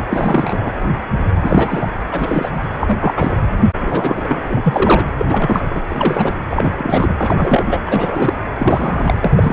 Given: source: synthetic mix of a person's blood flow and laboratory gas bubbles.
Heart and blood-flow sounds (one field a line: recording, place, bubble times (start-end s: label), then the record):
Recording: Doppler ultrasound of blood flow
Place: precordium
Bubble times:
0.00-0.05 s: bubbles
0.10-0.73 s: bubbles
1.42-1.88 s: bubbles
2.11-2.62 s: bubbles
2.80-3.37 s: bubbles
3.79-5.05 s: bubbles
5.18-5.82 s: bubbles
5.90-6.41 s: bubbles
6.50-7.15 s: bubbles
7.20-7.79 s: bubbles
7.86-8.34 s: bubbles
8.59-9.14 s: bubbles
9.23-9.53 s: bubbles
From the record:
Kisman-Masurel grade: 333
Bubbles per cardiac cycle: rolling drumbeat, 9 or more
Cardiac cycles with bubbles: 50 to 99%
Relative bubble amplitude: loud (0.450 to 0.775)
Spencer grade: 3 (all of the cardiac periods contain showers or single bubble signals, but not dominating or overriding the cardiac motion signals)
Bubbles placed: anywhere in the cardiac cycle